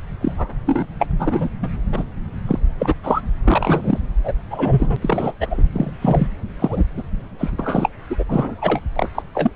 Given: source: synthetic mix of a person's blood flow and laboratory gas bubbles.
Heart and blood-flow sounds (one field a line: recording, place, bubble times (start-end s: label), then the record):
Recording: Doppler ultrasound of blood flow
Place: subclavian vein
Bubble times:
0.21-0.49 s: bubbles
0.66-0.86 s: bubbles
0.99-1.06 s: bubbles
1.18-1.49 s: bubbles
1.62-1.69 s: bubbles
1.92-2.04 s: bubbles
2.47-2.59 s: bubbles
2.79-2.95 s: bubbles
3.03-3.21 s: bubbles
3.44-4.01 s: bubbles
4.24-4.33 s: bubbles
4.50-4.96 s: bubbles
5.01-5.35 s: bubbles
5.39-5.63 s: bubbles
5.72-5.91 s: bubbles
6.01-6.27 s: bubbles
6.59-6.83 s: bubbles
6.97-7.03 s: bubbles
7.38-7.50 s: bubbles
7.58-7.89 s: bubbles
8.09-8.23 s: bubbles
8.28-8.80 s: bubbles
8.96-9.08 s: bubbles
9.14-9.22 s: bubbles
9.34-9.50 s: bubbles
From the record:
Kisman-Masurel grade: 243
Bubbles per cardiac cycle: several, 3 to 8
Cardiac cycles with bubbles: 100%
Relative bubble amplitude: loud (0.450 to 0.775)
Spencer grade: 3 (all of the cardiac periods contain showers or single bubble signals, but not dominating or overriding the cardiac motion signals)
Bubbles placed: anywhere in the cardiac cycle